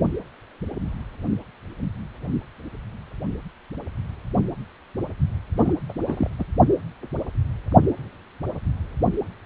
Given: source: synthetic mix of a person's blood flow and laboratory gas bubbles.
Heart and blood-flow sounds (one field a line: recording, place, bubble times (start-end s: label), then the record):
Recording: Doppler ultrasound of blood flow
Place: precordium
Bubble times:
5.57-5.74 s: bubbles
5.89-5.93 s: bubbles
6.06-6.30 s: bubbles
6.39-6.44 s: bubbles
From the record:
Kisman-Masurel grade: 221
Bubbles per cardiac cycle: several, 3 to 8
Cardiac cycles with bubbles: 10 to 50%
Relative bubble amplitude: barely perceptible (0.100 to 0.250)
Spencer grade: 2 (many but less than half of the cardiac periods contain bubble signals, singularly or in groups)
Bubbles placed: only in the low amplitude regions of the cardiac cycle